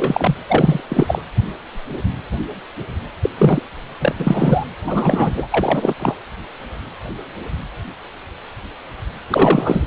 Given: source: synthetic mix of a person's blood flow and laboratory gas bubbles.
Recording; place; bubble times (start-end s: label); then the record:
Doppler ultrasound of blood flow; precordium
0.00-0.34 s: bubbles
0.47-0.81 s: bubbles
0.90-1.22 s: bubbles
3.23-3.30 s: bubbles
3.38-3.61 s: bubbles
4.00-4.15 s: bubbles
4.20-4.66 s: bubbles
4.87-5.48 s: bubbles
5.52-5.95 s: bubbles
5.99-6.16 s: bubbles
9.29-9.86 s: bubbles
From the record:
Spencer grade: 3 (all of the cardiac periods contain showers or single bubble signals, but not dominating or overriding the cardiac motion signals); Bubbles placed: anywhere in the cardiac cycle